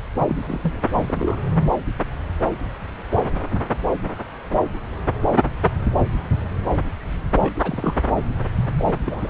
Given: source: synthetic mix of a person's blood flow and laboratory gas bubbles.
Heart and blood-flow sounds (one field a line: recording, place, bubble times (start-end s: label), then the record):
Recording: Doppler ultrasound of blood flow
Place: subclavian vein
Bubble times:
0.19-0.38 s: bubbles
0.46-0.73 s: bubbles
0.91-1.42 s: bubbles
7.39-7.53 s: bubbles
7.62-7.94 s: bubbles
8.79-8.95 s: bubbles
9.05-9.30 s: bubbles
From the record:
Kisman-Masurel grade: 221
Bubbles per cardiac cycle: several, 3 to 8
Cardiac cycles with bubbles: 10 to 50%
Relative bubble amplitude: barely perceptible (0.100 to 0.250)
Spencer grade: 2 (many but less than half of the cardiac periods contain bubble signals, singularly or in groups)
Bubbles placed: anywhere in the cardiac cycle